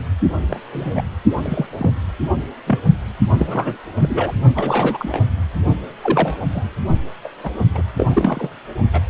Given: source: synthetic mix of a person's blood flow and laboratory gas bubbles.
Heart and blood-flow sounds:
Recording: Doppler ultrasound of blood flow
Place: precordium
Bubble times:
0.49-0.60 s: bubbles
0.72-1.03 s: bubbles
1.42-1.65 s: bubbles
1.78-1.90 s: bubbles
2.67-2.79 s: bubbles
3.37-3.77 s: bubbles
4.01-4.34 s: bubbles
4.55-5.23 s: bubbles
6.03-6.37 s: bubbles
6.54-6.64 s: bubbles
7.24-7.28 s: bubbles
7.43-7.50 s: bubbles
7.75-7.83 s: bubbles
7.97-8.50 s: bubbles
8.93-9.00 s: bubbles
From the record:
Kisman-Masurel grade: 242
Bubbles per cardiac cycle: several, 3 to 8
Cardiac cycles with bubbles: 100%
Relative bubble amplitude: moderate (0.250 to 0.450)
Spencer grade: 3 (all of the cardiac periods contain showers or single bubble signals, but not dominating or overriding the cardiac motion signals)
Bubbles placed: only in the low amplitude regions of the cardiac cycle

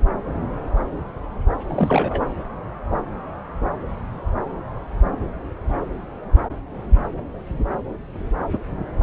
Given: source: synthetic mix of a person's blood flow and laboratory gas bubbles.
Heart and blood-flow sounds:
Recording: Doppler ultrasound of blood flow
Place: subclavian vein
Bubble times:
1.67-2.21 s: bubbles
From the record:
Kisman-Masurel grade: 212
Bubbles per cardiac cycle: several, 3 to 8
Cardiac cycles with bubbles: 1 to 10%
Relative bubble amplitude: moderate (0.250 to 0.450)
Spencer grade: 1 (occasional bubble signal discernible with the cardiac motion signal, with majority of cardiac periods free of bubbles)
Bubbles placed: anywhere in the cardiac cycle

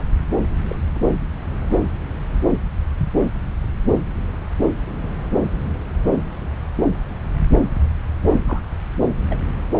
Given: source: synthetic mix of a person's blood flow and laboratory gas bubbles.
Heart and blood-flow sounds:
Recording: Doppler ultrasound of blood flow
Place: subclavian vein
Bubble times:
0.69-0.76 s: bubbles
0.94-1.00 s: bubbles
6.04-6.10 s: bubbles
8.45-8.61 s: bubbles
9.30-9.38 s: bubbles
9.41-9.46 s: bubbles
From the record:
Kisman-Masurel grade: 121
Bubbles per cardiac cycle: 1 to 2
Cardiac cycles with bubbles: 10 to 50%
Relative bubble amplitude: barely perceptible (0.100 to 0.250)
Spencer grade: 2 (many but less than half of the cardiac periods contain bubble signals, singularly or in groups)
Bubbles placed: anywhere in the cardiac cycle

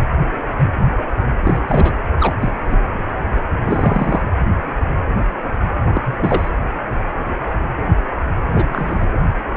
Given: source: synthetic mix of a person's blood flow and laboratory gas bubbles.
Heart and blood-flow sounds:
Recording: Doppler ultrasound of blood flow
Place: precordium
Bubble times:
1.44-1.60 s: bubbles
1.67-1.94 s: bubbles
2.19-2.34 s: bubbles
2.41-2.52 s: bubbles
2.68-2.78 s: bubbles
3.65-4.22 s: bubbles
5.94-6.48 s: bubbles
8.46-9.21 s: bubbles
From the record:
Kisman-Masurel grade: 222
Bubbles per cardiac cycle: several, 3 to 8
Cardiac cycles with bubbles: 10 to 50%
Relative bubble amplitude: moderate (0.250 to 0.450)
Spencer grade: 2 (many but less than half of the cardiac periods contain bubble signals, singularly or in groups)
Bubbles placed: anywhere in the cardiac cycle

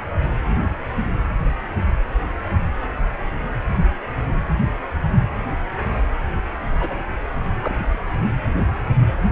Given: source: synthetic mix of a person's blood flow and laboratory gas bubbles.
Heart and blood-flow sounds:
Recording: Doppler ultrasound of blood flow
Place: precordium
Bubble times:
6.81-7.03 s: bubbles
7.59-8.00 s: bubbles
From the record:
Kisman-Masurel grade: 122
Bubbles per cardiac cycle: 1 to 2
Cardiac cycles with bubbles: 10 to 50%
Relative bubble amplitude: moderate (0.250 to 0.450)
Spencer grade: 2 (many but less than half of the cardiac periods contain bubble signals, singularly or in groups)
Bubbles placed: anywhere in the cardiac cycle

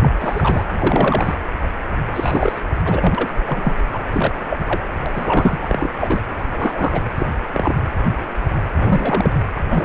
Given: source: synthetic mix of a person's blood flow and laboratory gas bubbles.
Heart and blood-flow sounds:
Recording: Doppler ultrasound of blood flow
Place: precordium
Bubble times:
0.01-0.10 s: bubbles
0.19-0.64 s: bubbles
0.78-1.35 s: bubbles
2.11-2.61 s: bubbles
2.84-3.29 s: bubbles
3.47-3.75 s: bubbles
3.92-4.00 s: bubbles
4.12-4.34 s: bubbles
4.50-4.60 s: bubbles
4.66-4.85 s: bubbles
5.06-5.58 s: bubbles
5.61-5.88 s: bubbles
6.00-6.21 s: bubbles
6.50-7.01 s: bubbles
7.18-7.26 s: bubbles
7.53-7.75 s: bubbles
8.76-9.30 s: bubbles
9.56-9.60 s: bubbles
9.70-9.85 s: bubbles
From the record:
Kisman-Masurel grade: 232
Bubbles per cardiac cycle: several, 3 to 8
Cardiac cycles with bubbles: 50 to 99%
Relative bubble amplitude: moderate (0.250 to 0.450)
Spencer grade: 3 (all of the cardiac periods contain showers or single bubble signals, but not dominating or overriding the cardiac motion signals)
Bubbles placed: anywhere in the cardiac cycle

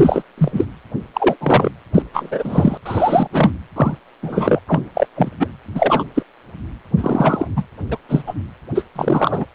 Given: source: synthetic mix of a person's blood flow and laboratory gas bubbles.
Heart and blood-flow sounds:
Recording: Doppler ultrasound of blood flow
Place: precordium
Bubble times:
0.00-0.23 s: bubbles
0.38-0.65 s: bubbles
1.14-1.36 s: bubbles
1.40-1.71 s: bubbles
1.94-2.02 s: bubbles
2.12-2.77 s: bubbles
2.85-3.27 s: bubbles
3.32-3.50 s: bubbles
3.76-3.97 s: bubbles
4.23-4.60 s: bubbles
4.67-4.81 s: bubbles
4.95-5.07 s: bubbles
5.16-5.30 s: bubbles
5.40-5.48 s: bubbles
5.75-6.03 s: bubbles
6.15-6.23 s: bubbles
6.97-7.48 s: bubbles
7.56-7.64 s: bubbles
7.90-7.98 s: bubbles
8.09-8.23 s: bubbles
8.26-8.34 s: bubbles
8.74-8.83 s: bubbles
8.96-9.46 s: bubbles
From the record:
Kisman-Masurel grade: 243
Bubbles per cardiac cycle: several, 3 to 8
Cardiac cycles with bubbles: 100%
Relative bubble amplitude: loud (0.450 to 0.775)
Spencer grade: 3 (all of the cardiac periods contain showers or single bubble signals, but not dominating or overriding the cardiac motion signals)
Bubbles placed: anywhere in the cardiac cycle

